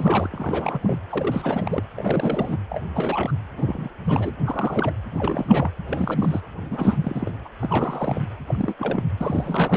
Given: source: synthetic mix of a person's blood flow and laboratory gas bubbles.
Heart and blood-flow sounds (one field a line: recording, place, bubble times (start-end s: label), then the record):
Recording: Doppler ultrasound of blood flow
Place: precordium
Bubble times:
0.00-0.28 s: bubbles
0.32-0.98 s: bubbles
1.09-1.83 s: bubbles
1.97-2.58 s: bubbles
2.70-2.81 s: bubbles
2.89-3.32 s: bubbles
3.56-3.89 s: bubbles
4.04-4.31 s: bubbles
4.46-4.95 s: bubbles
5.11-5.69 s: bubbles
5.88-6.41 s: bubbles
6.70-7.31 s: bubbles
7.45-7.49 s: bubbles
7.61-8.25 s: bubbles
8.48-8.74 s: bubbles
8.79-9.03 s: bubbles
9.17-9.77 s: bubbles
From the record:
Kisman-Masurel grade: 342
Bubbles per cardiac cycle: rolling drumbeat, 9 or more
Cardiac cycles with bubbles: 100%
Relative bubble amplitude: moderate (0.250 to 0.450)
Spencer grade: 3 (all of the cardiac periods contain showers or single bubble signals, but not dominating or overriding the cardiac motion signals)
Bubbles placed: anywhere in the cardiac cycle